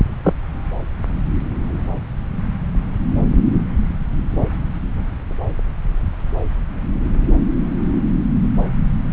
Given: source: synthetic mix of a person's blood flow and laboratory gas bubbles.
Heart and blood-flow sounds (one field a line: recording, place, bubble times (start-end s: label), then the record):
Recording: Doppler ultrasound of blood flow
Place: subclavian vein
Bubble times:
0.23-0.34 s: bubbles
From the record:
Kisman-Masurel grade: 123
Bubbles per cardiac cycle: 1 to 2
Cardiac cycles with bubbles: 10 to 50%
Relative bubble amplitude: loud (0.450 to 0.775)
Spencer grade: 2 (many but less than half of the cardiac periods contain bubble signals, singularly or in groups)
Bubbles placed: anywhere in the cardiac cycle